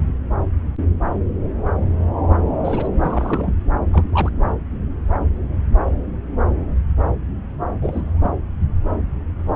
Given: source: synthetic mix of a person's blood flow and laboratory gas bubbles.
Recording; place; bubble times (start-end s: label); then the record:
Doppler ultrasound of blood flow; subclavian vein
2.65-2.88 s: bubbles
3.01-3.54 s: bubbles
3.91-4.03 s: bubbles
4.12-4.30 s: bubbles
7.81-8.30 s: bubbles
From the record:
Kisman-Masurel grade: 222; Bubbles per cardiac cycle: several, 3 to 8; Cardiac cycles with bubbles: 10 to 50%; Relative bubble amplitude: moderate (0.250 to 0.450); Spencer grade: 2 (many but less than half of the cardiac periods contain bubble signals, singularly or in groups); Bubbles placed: anywhere in the cardiac cycle